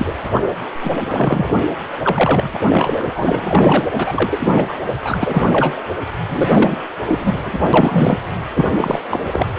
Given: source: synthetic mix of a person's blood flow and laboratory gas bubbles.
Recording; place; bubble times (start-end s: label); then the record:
Doppler ultrasound of blood flow; precordium
0.00-0.15 s: bubbles
0.34-0.41 s: bubbles
0.81-0.92 s: bubbles
1.05-1.54 s: bubbles
2.02-2.50 s: bubbles
2.54-2.58 s: bubbles
2.69-3.88 s: bubbles
3.93-4.66 s: bubbles
4.68-4.74 s: bubbles
5.01-5.78 s: bubbles
6.29-6.78 s: bubbles
7.08-7.62 s: bubbles
7.73-8.17 s: bubbles
8.53-8.67 s: bubbles
8.74-8.99 s: bubbles
9.10-9.54 s: bubbles
From the record:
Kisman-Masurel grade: 343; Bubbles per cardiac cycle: rolling drumbeat, 9 or more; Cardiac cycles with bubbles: 100%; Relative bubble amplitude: loud (0.450 to 0.775); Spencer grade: 3 (all of the cardiac periods contain showers or single bubble signals, but not dominating or overriding the cardiac motion signals); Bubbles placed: anywhere in the cardiac cycle